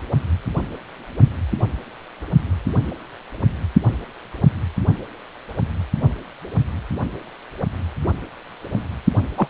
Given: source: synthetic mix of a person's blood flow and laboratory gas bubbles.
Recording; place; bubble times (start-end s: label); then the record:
Doppler ultrasound of blood flow; precordium
9.37-9.47 s: bubbles
From the record:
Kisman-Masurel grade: 113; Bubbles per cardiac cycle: 1 to 2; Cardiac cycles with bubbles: 1 to 10%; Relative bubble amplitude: loud (0.450 to 0.775); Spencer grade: 1 (occasional bubble signal discernible with the cardiac motion signal, with majority of cardiac periods free of bubbles); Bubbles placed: only in the low amplitude regions of the cardiac cycle